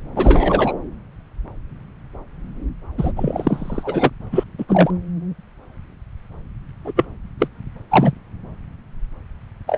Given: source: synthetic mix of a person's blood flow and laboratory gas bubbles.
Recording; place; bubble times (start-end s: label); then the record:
Doppler ultrasound of blood flow; subclavian vein
0.15-0.72 s: bubbles
2.98-3.12 s: bubbles
3.16-4.10 s: bubbles
4.32-4.43 s: bubbles
4.58-4.64 s: bubbles
4.68-4.90 s: bubbles
6.84-6.93 s: bubbles
6.96-7.05 s: bubbles
7.39-7.47 s: bubbles
7.90-8.12 s: bubbles
9.67-9.78 s: bubbles
From the record:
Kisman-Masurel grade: 233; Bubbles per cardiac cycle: several, 3 to 8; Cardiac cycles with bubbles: 50 to 99%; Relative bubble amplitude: loud (0.450 to 0.775); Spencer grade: 3 (all of the cardiac periods contain showers or single bubble signals, but not dominating or overriding the cardiac motion signals); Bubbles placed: anywhere in the cardiac cycle